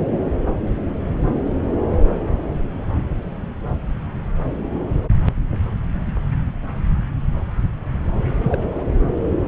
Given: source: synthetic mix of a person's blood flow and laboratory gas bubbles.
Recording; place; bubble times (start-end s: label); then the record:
Doppler ultrasound of blood flow; subclavian vein
8.41-8.62 s: bubbles
8.75-8.84 s: bubbles
From the record:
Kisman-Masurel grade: 211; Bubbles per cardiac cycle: several, 3 to 8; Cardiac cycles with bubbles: 1 to 10%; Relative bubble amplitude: barely perceptible (0.100 to 0.250); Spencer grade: 1 (occasional bubble signal discernible with the cardiac motion signal, with majority of cardiac periods free of bubbles); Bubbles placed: anywhere in the cardiac cycle